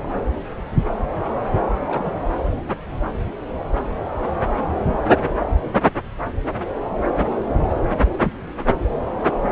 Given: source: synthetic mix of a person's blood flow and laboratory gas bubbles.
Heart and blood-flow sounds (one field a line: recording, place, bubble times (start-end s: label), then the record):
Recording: Doppler ultrasound of blood flow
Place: subclavian vein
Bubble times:
1.87-2.45 s: bubbles
From the record:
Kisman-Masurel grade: 221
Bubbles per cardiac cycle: several, 3 to 8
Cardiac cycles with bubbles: 10 to 50%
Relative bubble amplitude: barely perceptible (0.100 to 0.250)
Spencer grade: 2 (many but less than half of the cardiac periods contain bubble signals, singularly or in groups)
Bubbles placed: anywhere in the cardiac cycle